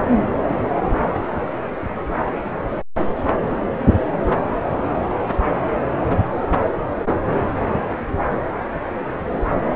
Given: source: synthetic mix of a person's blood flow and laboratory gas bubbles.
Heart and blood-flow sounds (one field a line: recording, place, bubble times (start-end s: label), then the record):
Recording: Doppler ultrasound of blood flow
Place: subclavian vein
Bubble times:
no bubbles
From the record:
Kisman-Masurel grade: 000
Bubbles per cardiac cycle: 0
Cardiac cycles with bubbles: 0%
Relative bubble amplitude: no bubbles discernible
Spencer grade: 0 (complete lack of bubble signals)